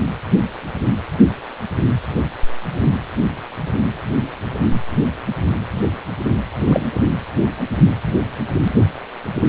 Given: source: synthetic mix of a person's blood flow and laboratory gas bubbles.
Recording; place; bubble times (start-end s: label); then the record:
Doppler ultrasound of blood flow; precordium
6.67-6.88 s: bubbles
From the record:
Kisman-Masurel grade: 213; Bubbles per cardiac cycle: several, 3 to 8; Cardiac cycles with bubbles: 1 to 10%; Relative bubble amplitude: loud (0.450 to 0.775); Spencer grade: 1 (occasional bubble signal discernible with the cardiac motion signal, with majority of cardiac periods free of bubbles); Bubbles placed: anywhere in the cardiac cycle